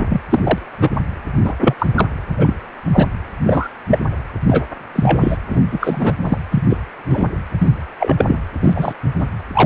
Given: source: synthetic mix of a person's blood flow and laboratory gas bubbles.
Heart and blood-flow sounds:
Doppler ultrasound of blood flow; precordium
0.00-0.06 s: bubbles
0.09-0.21 s: bubbles
0.29-0.40 s: bubbles
0.43-0.59 s: bubbles
0.81-0.91 s: bubbles
1.44-1.53 s: bubbles
1.59-1.75 s: bubbles
1.78-1.87 s: bubbles
1.94-2.08 s: bubbles
2.38-2.54 s: bubbles
2.92-3.07 s: bubbles
3.46-3.69 s: bubbles
3.87-4.00 s: bubbles
4.46-4.63 s: bubbles
4.95-5.37 s: bubbles
5.49-5.60 s: bubbles
5.71-6.13 s: bubbles
6.22-6.38 s: bubbles
6.51-6.63 s: bubbles
6.69-6.78 s: bubbles
7.09-7.29 s: bubbles
7.58-7.75 s: bubbles
7.99-8.15 s: bubbles
8.18-8.39 s: bubbles
8.62-8.93 s: bubbles
9.18-9.27 s: bubbles
9.54-9.66 s: bubbles
From the record:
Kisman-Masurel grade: 243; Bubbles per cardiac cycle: several, 3 to 8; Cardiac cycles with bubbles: 100%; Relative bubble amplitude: loud (0.450 to 0.775); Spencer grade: 3 (all of the cardiac periods contain showers or single bubble signals, but not dominating or overriding the cardiac motion signals); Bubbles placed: anywhere in the cardiac cycle

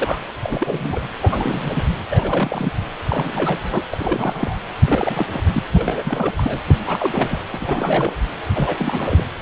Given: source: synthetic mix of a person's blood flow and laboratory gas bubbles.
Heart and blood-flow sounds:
Doppler ultrasound of blood flow; precordium
0.00-0.19 s: bubbles
0.42-1.09 s: bubbles
1.22-1.83 s: bubbles
2.10-2.72 s: bubbles
3.08-3.84 s: bubbles
3.91-4.58 s: bubbles
4.84-5.26 s: bubbles
5.33-5.43 s: bubbles
5.46-5.63 s: bubbles
5.74-6.33 s: bubbles
6.37-6.62 s: bubbles
6.65-6.75 s: bubbles
6.84-7.42 s: bubbles
7.53-8.13 s: bubbles
8.54-9.23 s: bubbles
9.40-9.42 s: bubbles
From the record:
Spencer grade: 3 (all of the cardiac periods contain showers or single bubble signals, but not dominating or overriding the cardiac motion signals); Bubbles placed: anywhere in the cardiac cycle

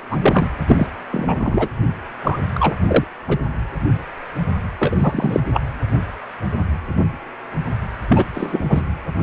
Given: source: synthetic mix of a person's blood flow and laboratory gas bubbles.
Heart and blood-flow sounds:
Doppler ultrasound of blood flow; precordium
0.11-0.17 s: bubbles
0.21-0.47 s: bubbles
0.67-0.86 s: bubbles
1.11-1.69 s: bubbles
2.23-2.39 s: bubbles
2.54-2.74 s: bubbles
2.87-3.04 s: bubbles
3.28-3.38 s: bubbles
4.79-5.40 s: bubbles
5.54-5.61 s: bubbles
8.09-8.25 s: bubbles
8.32-8.81 s: bubbles
From the record:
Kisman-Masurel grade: 233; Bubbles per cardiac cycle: several, 3 to 8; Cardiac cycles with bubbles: 50 to 99%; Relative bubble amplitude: loud (0.450 to 0.775); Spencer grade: 3 (all of the cardiac periods contain showers or single bubble signals, but not dominating or overriding the cardiac motion signals); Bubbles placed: anywhere in the cardiac cycle

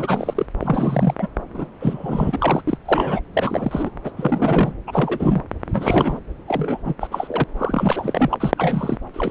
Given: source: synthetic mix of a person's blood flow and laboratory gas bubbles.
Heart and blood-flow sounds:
Doppler ultrasound of blood flow; subclavian vein
0.00-0.46 s: bubbles
0.59-1.14 s: bubbles
1.18-1.27 s: bubbles
1.54-1.67 s: bubbles
1.80-2.62 s: bubbles
2.67-2.77 s: bubbles
2.85-3.21 s: bubbles
3.33-3.91 s: bubbles
4.04-4.11 s: bubbles
4.17-4.73 s: bubbles
4.87-5.42 s: bubbles
5.67-6.20 s: bubbles
6.47-6.79 s: bubbles
6.84-6.95 s: bubbles
7.00-7.07 s: bubbles
7.11-7.44 s: bubbles
7.59-8.51 s: bubbles
8.57-8.97 s: bubbles
9.13-9.31 s: bubbles
From the record:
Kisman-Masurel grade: 342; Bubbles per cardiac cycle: rolling drumbeat, 9 or more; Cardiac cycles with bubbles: 100%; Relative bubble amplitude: moderate (0.250 to 0.450); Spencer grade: 3 (all of the cardiac periods contain showers or single bubble signals, but not dominating or overriding the cardiac motion signals); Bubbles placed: anywhere in the cardiac cycle

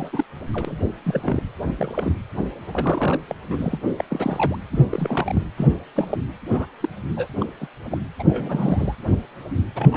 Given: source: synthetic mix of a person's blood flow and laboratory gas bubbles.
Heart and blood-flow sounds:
Doppler ultrasound of blood flow; precordium
0.00-0.10 s: bubbles
0.12-0.25 s: bubbles
0.53-0.77 s: bubbles
1.04-1.43 s: bubbles
1.78-2.13 s: bubbles
2.72-3.19 s: bubbles
3.27-3.35 s: bubbles
3.48-3.77 s: bubbles
3.98-4.05 s: bubbles
4.10-4.57 s: bubbles
4.71-4.85 s: bubbles
4.90-5.43 s: bubbles
5.57-5.68 s: bubbles
5.96-6.08 s: bubbles
6.11-6.18 s: bubbles
6.50-6.66 s: bubbles
6.81-6.89 s: bubbles
7.16-7.27 s: bubbles
7.40-7.46 s: bubbles
7.61-7.68 s: bubbles
7.91-7.98 s: bubbles
8.19-8.24 s: bubbles
8.29-8.95 s: bubbles
9.75-9.97 s: bubbles
From the record:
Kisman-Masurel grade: 232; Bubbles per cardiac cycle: several, 3 to 8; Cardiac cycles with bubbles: 50 to 99%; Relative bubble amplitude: moderate (0.250 to 0.450); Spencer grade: 3 (all of the cardiac periods contain showers or single bubble signals, but not dominating or overriding the cardiac motion signals); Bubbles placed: anywhere in the cardiac cycle

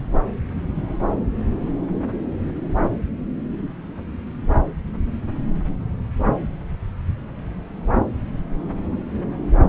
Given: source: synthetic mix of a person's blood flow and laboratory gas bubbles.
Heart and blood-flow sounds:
Doppler ultrasound of blood flow; subclavian vein
no bubbles
From the record:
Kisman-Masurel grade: 000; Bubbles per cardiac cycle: 0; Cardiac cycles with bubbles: 0%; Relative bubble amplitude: no bubbles discernible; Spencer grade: 0 (complete lack of bubble signals)

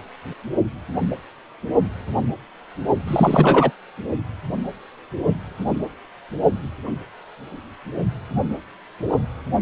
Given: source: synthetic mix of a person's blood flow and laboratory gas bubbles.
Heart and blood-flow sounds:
Doppler ultrasound of blood flow; precordium
3.07-3.71 s: bubbles
From the record:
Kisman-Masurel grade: 223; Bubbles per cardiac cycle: several, 3 to 8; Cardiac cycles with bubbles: 10 to 50%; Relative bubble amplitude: loud (0.450 to 0.775); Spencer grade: 2 (many but less than half of the cardiac periods contain bubble signals, singularly or in groups); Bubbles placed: only in the low amplitude regions of the cardiac cycle

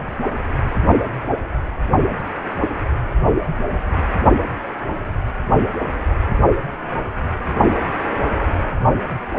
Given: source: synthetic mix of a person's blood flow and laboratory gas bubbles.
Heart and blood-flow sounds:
Doppler ultrasound of blood flow; precordium
3.42-3.63 s: bubbles
7.79-7.93 s: bubbles
8.12-8.23 s: bubbles
From the record:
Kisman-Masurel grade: 121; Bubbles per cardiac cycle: 1 to 2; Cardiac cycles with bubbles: 10 to 50%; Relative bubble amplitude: barely perceptible (0.100 to 0.250); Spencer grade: 2 (many but less than half of the cardiac periods contain bubble signals, singularly or in groups); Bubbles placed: only in the low amplitude regions of the cardiac cycle

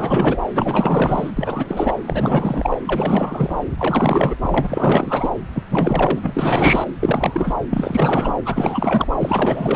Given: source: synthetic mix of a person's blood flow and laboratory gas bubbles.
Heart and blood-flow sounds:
Doppler ultrasound of blood flow; subclavian vein
0.00-0.39 s: bubbles
0.53-1.30 s: bubbles
1.36-1.95 s: bubbles
2.06-2.78 s: bubbles
2.86-3.55 s: bubbles
3.78-4.37 s: bubbles
4.42-5.29 s: bubbles
5.54-5.64 s: bubbles
5.69-6.88 s: bubbles
7.00-7.56 s: bubbles
7.70-8.33 s: bubbles
8.44-9.07 s: bubbles
9.19-9.76 s: bubbles
From the record:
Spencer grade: 4 (maximum detectable bubble signal sounding continuously throughout systole and diastole of every cardiac period, and overriding the amplitude of the normal cardiac signals); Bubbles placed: anywhere in the cardiac cycle

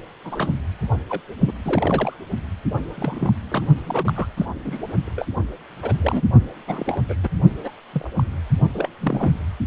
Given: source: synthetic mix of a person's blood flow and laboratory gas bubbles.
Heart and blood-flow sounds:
Doppler ultrasound of blood flow; precordium
0.24-0.53 s: bubbles
1.09-1.21 s: bubbles
1.47-1.52 s: bubbles
1.65-2.16 s: bubbles
2.96-3.32 s: bubbles
3.50-3.68 s: bubbles
3.85-4.27 s: bubbles
4.37-4.46 s: bubbles
4.64-4.81 s: bubbles
5.05-5.27 s: bubbles
5.82-6.23 s: bubbles
6.67-7.01 s: bubbles
7.08-7.16 s: bubbles
7.23-7.29 s: bubbles
7.63-7.71 s: bubbles
7.93-8.09 s: bubbles
8.16-8.24 s: bubbles
8.74-8.88 s: bubbles
9.00-9.34 s: bubbles
From the record:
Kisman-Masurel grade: 232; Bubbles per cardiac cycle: several, 3 to 8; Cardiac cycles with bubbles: 50 to 99%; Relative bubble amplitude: moderate (0.250 to 0.450); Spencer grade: 3 (all of the cardiac periods contain showers or single bubble signals, but not dominating or overriding the cardiac motion signals); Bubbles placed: only in the low amplitude regions of the cardiac cycle

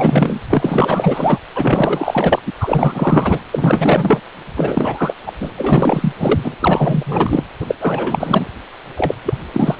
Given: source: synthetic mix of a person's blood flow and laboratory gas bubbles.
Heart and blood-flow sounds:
Doppler ultrasound of blood flow; precordium
0.00-0.40 s: bubbles
0.49-1.40 s: bubbles
1.55-2.40 s: bubbles
2.46-2.51 s: bubbles
2.60-3.42 s: bubbles
3.52-4.20 s: bubbles
4.56-5.16 s: bubbles
5.25-5.32 s: bubbles
5.39-5.52 s: bubbles
5.57-6.12 s: bubbles
6.19-6.54 s: bubbles
6.59-7.44 s: bubbles
7.60-7.75 s: bubbles
7.80-8.48 s: bubbles
8.96-9.16 s: bubbles
9.25-9.33 s: bubbles
9.53-9.76 s: bubbles
From the record:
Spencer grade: 4 (maximum detectable bubble signal sounding continuously throughout systole and diastole of every cardiac period, and overriding the amplitude of the normal cardiac signals); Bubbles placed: anywhere in the cardiac cycle

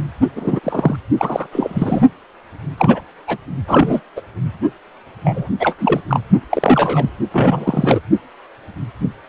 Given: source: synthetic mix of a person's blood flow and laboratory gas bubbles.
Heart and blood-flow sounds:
Doppler ultrasound of blood flow; precordium
0.35-0.60 s: bubbles
0.63-0.96 s: bubbles
1.18-1.47 s: bubbles
1.52-2.02 s: bubbles
2.77-3.01 s: bubbles
3.27-3.38 s: bubbles
3.67-4.00 s: bubbles
4.16-4.21 s: bubbles
5.24-5.48 s: bubbles
5.59-5.75 s: bubbles
5.79-6.00 s: bubbles
6.08-6.20 s: bubbles
6.50-7.10 s: bubbles
7.32-8.00 s: bubbles
From the record:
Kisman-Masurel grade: 233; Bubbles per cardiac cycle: several, 3 to 8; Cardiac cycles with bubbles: 50 to 99%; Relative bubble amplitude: loud (0.450 to 0.775); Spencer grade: 3 (all of the cardiac periods contain showers or single bubble signals, but not dominating or overriding the cardiac motion signals); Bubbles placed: only in the low amplitude regions of the cardiac cycle

